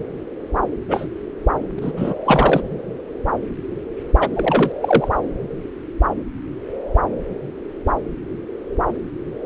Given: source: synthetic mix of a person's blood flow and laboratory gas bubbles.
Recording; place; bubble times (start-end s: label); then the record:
Doppler ultrasound of blood flow; subclavian vein
0.88-1.07 s: bubbles
1.76-1.92 s: bubbles
1.97-2.15 s: bubbles
2.25-2.61 s: bubbles
4.21-4.28 s: bubbles
4.34-4.72 s: bubbles
4.80-5.09 s: bubbles
From the record:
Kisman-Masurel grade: 223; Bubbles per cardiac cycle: several, 3 to 8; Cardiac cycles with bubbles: 10 to 50%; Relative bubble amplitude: loud (0.450 to 0.775); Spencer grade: 2 (many but less than half of the cardiac periods contain bubble signals, singularly or in groups); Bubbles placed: anywhere in the cardiac cycle